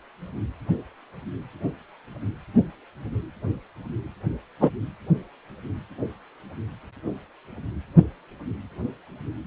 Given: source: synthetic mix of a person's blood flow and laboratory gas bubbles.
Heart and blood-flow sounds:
Doppler ultrasound of blood flow; precordium
4.60-4.69 s: bubbles
From the record:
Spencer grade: 1 (occasional bubble signal discernible with the cardiac motion signal, with majority of cardiac periods free of bubbles); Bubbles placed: anywhere in the cardiac cycle

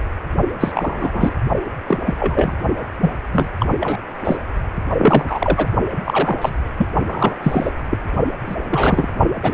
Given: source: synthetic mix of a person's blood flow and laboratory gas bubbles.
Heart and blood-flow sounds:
Doppler ultrasound of blood flow; precordium
0.00-0.03 s: bubbles
0.60-0.72 s: bubbles
0.74-1.32 s: bubbles
1.88-1.98 s: bubbles
2.06-2.14 s: bubbles
2.20-2.54 s: bubbles
3.01-3.11 s: bubbles
3.31-3.48 s: bubbles
3.60-3.67 s: bubbles
3.80-3.98 s: bubbles
4.25-4.42 s: bubbles
4.99-5.67 s: bubbles
6.04-6.36 s: bubbles
6.41-6.54 s: bubbles
6.78-6.88 s: bubbles
7.07-7.35 s: bubbles
7.42-7.71 s: bubbles
7.90-7.98 s: bubbles
8.46-8.55 s: bubbles
8.69-9.08 s: bubbles
9.43-9.54 s: bubbles
From the record:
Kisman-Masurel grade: 242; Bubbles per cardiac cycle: several, 3 to 8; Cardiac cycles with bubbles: 100%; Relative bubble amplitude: moderate (0.250 to 0.450); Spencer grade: 3 (all of the cardiac periods contain showers or single bubble signals, but not dominating or overriding the cardiac motion signals); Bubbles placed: only in the low amplitude regions of the cardiac cycle

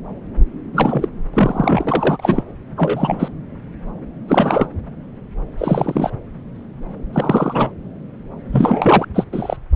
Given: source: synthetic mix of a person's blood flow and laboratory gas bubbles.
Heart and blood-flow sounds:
Doppler ultrasound of blood flow; subclavian vein
0.73-1.08 s: bubbles
1.33-2.43 s: bubbles
2.76-3.28 s: bubbles
4.28-4.67 s: bubbles
5.58-6.10 s: bubbles
7.12-7.71 s: bubbles
8.52-9.05 s: bubbles
9.14-9.24 s: bubbles
9.32-9.56 s: bubbles
From the record:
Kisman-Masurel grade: 233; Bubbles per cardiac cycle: several, 3 to 8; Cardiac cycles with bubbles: 50 to 99%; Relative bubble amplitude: loud (0.450 to 0.775); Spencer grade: 3 (all of the cardiac periods contain showers or single bubble signals, but not dominating or overriding the cardiac motion signals); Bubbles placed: anywhere in the cardiac cycle

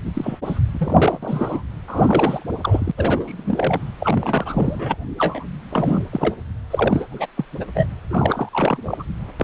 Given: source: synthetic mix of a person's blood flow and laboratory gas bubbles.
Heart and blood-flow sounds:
Doppler ultrasound of blood flow; precordium
0.06-0.39 s: bubbles
0.45-0.60 s: bubbles
0.73-1.18 s: bubbles
1.23-1.62 s: bubbles
1.87-2.46 s: bubbles
2.61-2.92 s: bubbles
2.98-3.80 s: bubbles
4.00-4.97 s: bubbles
5.19-5.45 s: bubbles
5.70-6.03 s: bubbles
6.11-6.35 s: bubbles
6.70-7.08 s: bubbles
7.10-7.26 s: bubbles
7.36-7.45 s: bubbles
7.60-7.65 s: bubbles
7.75-7.86 s: bubbles
8.09-8.49 s: bubbles
8.52-9.04 s: bubbles
9.39-9.44 s: bubbles
From the record:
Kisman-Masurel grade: 342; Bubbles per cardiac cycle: rolling drumbeat, 9 or more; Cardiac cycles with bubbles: 100%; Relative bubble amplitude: moderate (0.250 to 0.450); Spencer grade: 3 (all of the cardiac periods contain showers or single bubble signals, but not dominating or overriding the cardiac motion signals); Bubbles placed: anywhere in the cardiac cycle

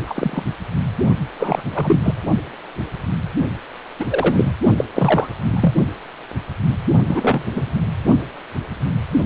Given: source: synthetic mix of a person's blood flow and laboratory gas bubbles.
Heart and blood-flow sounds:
Doppler ultrasound of blood flow; precordium
0.07-0.43 s: bubbles
1.39-1.62 s: bubbles
1.71-1.99 s: bubbles
2.03-2.14 s: bubbles
3.99-4.06 s: bubbles
4.10-4.52 s: bubbles
4.77-4.85 s: bubbles
4.94-5.27 s: bubbles
5.46-5.73 s: bubbles
7.08-7.46 s: bubbles
7.55-7.71 s: bubbles
From the record:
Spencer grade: 3 (all of the cardiac periods contain showers or single bubble signals, but not dominating or overriding the cardiac motion signals); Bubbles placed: only in the low amplitude regions of the cardiac cycle

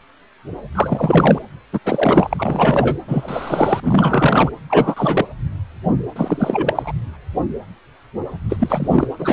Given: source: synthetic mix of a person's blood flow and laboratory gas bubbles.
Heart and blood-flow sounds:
Doppler ultrasound of blood flow; precordium
0.75-1.42 s: bubbles
1.73-1.80 s: bubbles
1.85-2.96 s: bubbles
3.08-4.50 s: bubbles
4.69-5.26 s: bubbles
6.15-6.93 s: bubbles
8.49-9.08 s: bubbles
9.19-9.33 s: bubbles
From the record:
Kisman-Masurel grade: 333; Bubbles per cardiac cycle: rolling drumbeat, 9 or more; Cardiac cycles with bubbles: 50 to 99%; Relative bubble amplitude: loud (0.450 to 0.775); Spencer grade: 3 (all of the cardiac periods contain showers or single bubble signals, but not dominating or overriding the cardiac motion signals); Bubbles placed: anywhere in the cardiac cycle

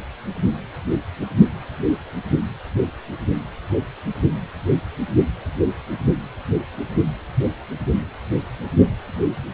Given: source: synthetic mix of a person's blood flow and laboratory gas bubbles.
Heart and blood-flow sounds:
Doppler ultrasound of blood flow; precordium
no bubbles
From the record:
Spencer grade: 0 (complete lack of bubble signals)

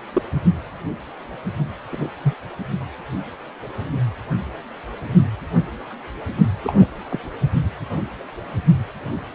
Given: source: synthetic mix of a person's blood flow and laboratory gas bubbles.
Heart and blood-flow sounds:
Doppler ultrasound of blood flow; precordium
0.14-0.22 s: bubbles
1.91-2.07 s: bubbles
2.22-2.33 s: bubbles
6.64-6.87 s: bubbles
7.10-7.19 s: bubbles
From the record:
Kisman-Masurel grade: 122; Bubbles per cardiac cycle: 1 to 2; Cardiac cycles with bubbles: 10 to 50%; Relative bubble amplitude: moderate (0.250 to 0.450); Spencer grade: 2 (many but less than half of the cardiac periods contain bubble signals, singularly or in groups); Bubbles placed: only in the low amplitude regions of the cardiac cycle

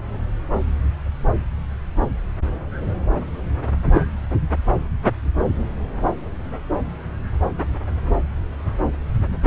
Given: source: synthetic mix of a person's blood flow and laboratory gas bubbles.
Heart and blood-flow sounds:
Doppler ultrasound of blood flow; subclavian vein
3.93-4.02 s: bubbles
From the record:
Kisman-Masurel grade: 113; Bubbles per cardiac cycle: 1 to 2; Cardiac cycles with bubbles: 1 to 10%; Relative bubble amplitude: loud (0.450 to 0.775); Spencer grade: 1 (occasional bubble signal discernible with the cardiac motion signal, with majority of cardiac periods free of bubbles); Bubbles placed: anywhere in the cardiac cycle

